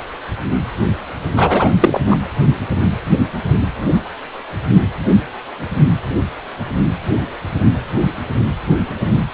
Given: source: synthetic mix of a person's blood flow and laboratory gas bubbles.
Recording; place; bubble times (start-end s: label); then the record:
Doppler ultrasound of blood flow; precordium
1.35-1.70 s: bubbles
1.80-2.00 s: bubbles
2.06-2.17 s: bubbles
From the record:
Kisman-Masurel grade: 213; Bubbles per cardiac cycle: several, 3 to 8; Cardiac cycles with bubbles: 1 to 10%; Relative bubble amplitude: loud (0.450 to 0.775); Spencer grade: 1 (occasional bubble signal discernible with the cardiac motion signal, with majority of cardiac periods free of bubbles); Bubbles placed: only in the low amplitude regions of the cardiac cycle